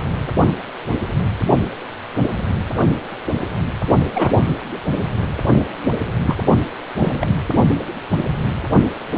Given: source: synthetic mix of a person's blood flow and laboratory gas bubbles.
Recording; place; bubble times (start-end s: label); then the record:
Doppler ultrasound of blood flow; precordium
4.14-4.32 s: bubbles
6.26-6.35 s: bubbles
6.98-7.27 s: bubbles
From the record:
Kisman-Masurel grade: 122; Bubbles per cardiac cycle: 1 to 2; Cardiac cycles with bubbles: 10 to 50%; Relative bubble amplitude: moderate (0.250 to 0.450); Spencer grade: 2 (many but less than half of the cardiac periods contain bubble signals, singularly or in groups); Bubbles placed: only in the low amplitude regions of the cardiac cycle